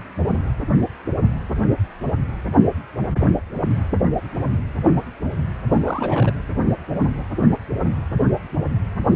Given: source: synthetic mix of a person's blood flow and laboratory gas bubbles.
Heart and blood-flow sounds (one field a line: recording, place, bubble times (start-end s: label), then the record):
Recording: Doppler ultrasound of blood flow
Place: precordium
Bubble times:
5.72-6.33 s: bubbles
From the record:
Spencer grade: 1 (occasional bubble signal discernible with the cardiac motion signal, with majority of cardiac periods free of bubbles)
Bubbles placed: anywhere in the cardiac cycle